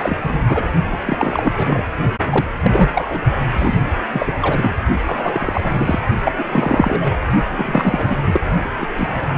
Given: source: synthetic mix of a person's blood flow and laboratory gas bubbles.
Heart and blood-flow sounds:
Doppler ultrasound of blood flow; precordium
0.00-0.39 s: bubbles
0.48-0.66 s: bubbles
0.91-0.98 s: bubbles
1.06-1.52 s: bubbles
1.57-1.91 s: bubbles
2.31-2.50 s: bubbles
2.63-2.90 s: bubbles
2.94-3.21 s: bubbles
3.53-3.78 s: bubbles
4.12-4.76 s: bubbles
5.05-6.00 s: bubbles
6.25-6.32 s: bubbles
6.38-6.43 s: bubbles
6.46-7.17 s: bubbles
7.47-8.17 s: bubbles
8.24-8.41 s: bubbles
8.81-8.87 s: bubbles
8.96-9.29 s: bubbles
From the record:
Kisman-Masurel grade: 343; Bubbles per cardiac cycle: rolling drumbeat, 9 or more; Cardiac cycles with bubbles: 100%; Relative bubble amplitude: loud (0.450 to 0.775); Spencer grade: 3 (all of the cardiac periods contain showers or single bubble signals, but not dominating or overriding the cardiac motion signals); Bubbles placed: only in the low amplitude regions of the cardiac cycle

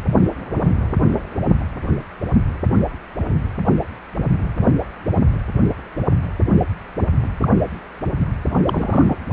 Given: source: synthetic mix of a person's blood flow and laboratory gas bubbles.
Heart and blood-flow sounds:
Doppler ultrasound of blood flow; precordium
7.41-7.49 s: bubbles
8.17-8.26 s: bubbles
8.66-9.16 s: bubbles
From the record:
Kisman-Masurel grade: 122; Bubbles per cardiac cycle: 1 to 2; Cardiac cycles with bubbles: 10 to 50%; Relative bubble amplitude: moderate (0.250 to 0.450); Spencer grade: 2 (many but less than half of the cardiac periods contain bubble signals, singularly or in groups); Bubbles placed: anywhere in the cardiac cycle

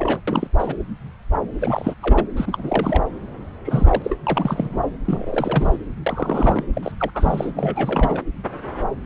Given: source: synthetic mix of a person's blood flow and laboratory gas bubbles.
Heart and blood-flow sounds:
Doppler ultrasound of blood flow; subclavian vein
0.00-0.21 s: bubbles
0.27-0.47 s: bubbles
0.58-0.74 s: bubbles
1.59-1.95 s: bubbles
2.00-2.27 s: bubbles
2.36-3.03 s: bubbles
3.65-4.17 s: bubbles
4.26-4.84 s: bubbles
5.05-5.76 s: bubbles
6.06-6.64 s: bubbles
6.73-6.92 s: bubbles
6.97-7.10 s: bubbles
7.14-8.22 s: bubbles
From the record:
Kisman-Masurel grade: 332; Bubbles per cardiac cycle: rolling drumbeat, 9 or more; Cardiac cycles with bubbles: 50 to 99%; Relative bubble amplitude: moderate (0.250 to 0.450); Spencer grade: 3 (all of the cardiac periods contain showers or single bubble signals, but not dominating or overriding the cardiac motion signals); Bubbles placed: anywhere in the cardiac cycle

